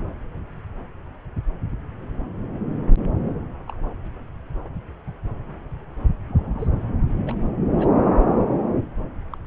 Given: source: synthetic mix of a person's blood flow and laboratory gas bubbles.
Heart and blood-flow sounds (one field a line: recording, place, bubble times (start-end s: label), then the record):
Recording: Doppler ultrasound of blood flow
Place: subclavian vein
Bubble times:
3.68-3.76 s: bubbles
6.28-6.67 s: bubbles
7.25-7.35 s: bubbles
7.78-7.89 s: bubbles
9.30-9.37 s: bubbles
From the record:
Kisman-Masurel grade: 121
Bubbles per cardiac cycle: 1 to 2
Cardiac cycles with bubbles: 10 to 50%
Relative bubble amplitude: barely perceptible (0.100 to 0.250)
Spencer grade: 2 (many but less than half of the cardiac periods contain bubble signals, singularly or in groups)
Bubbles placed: anywhere in the cardiac cycle